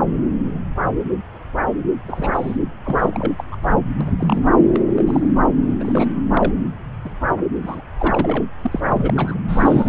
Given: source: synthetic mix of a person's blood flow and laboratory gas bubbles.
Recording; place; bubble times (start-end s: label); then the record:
Doppler ultrasound of blood flow; subclavian vein
2.04-2.57 s: bubbles
2.84-3.33 s: bubbles
3.38-3.44 s: bubbles
3.52-3.56 s: bubbles
3.62-3.79 s: bubbles
4.00-4.14 s: bubbles
4.17-4.42 s: bubbles
4.73-4.82 s: bubbles
4.88-5.33 s: bubbles
5.59-5.75 s: bubbles
5.79-6.14 s: bubbles
6.33-6.52 s: bubbles
7.04-7.17 s: bubbles
7.62-7.82 s: bubbles
7.98-8.44 s: bubbles
8.62-8.80 s: bubbles
8.88-9.38 s: bubbles
9.48-9.89 s: bubbles
From the record:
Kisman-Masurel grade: 232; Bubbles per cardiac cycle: several, 3 to 8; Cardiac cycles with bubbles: 50 to 99%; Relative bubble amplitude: moderate (0.250 to 0.450); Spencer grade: 3 (all of the cardiac periods contain showers or single bubble signals, but not dominating or overriding the cardiac motion signals); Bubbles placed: anywhere in the cardiac cycle